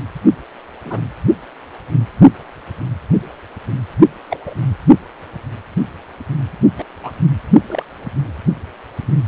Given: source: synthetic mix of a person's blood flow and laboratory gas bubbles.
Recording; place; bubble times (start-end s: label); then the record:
Doppler ultrasound of blood flow; precordium
0.85-1.01 s: bubbles
4.30-4.37 s: bubbles
4.46-4.55 s: bubbles
6.78-6.84 s: bubbles
7.03-7.12 s: bubbles
7.67-7.83 s: bubbles
From the record:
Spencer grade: 2 (many but less than half of the cardiac periods contain bubble signals, singularly or in groups); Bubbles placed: only in the low amplitude regions of the cardiac cycle